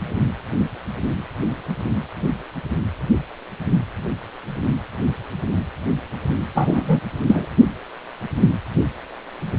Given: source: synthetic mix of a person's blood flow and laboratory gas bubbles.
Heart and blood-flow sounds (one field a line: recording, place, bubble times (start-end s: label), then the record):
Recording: Doppler ultrasound of blood flow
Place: precordium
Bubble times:
6.54-7.01 s: bubbles
7.27-7.46 s: bubbles
From the record:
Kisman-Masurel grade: 113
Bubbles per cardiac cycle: 1 to 2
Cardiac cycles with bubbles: 1 to 10%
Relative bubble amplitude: loud (0.450 to 0.775)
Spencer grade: 1 (occasional bubble signal discernible with the cardiac motion signal, with majority of cardiac periods free of bubbles)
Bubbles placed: only in the low amplitude regions of the cardiac cycle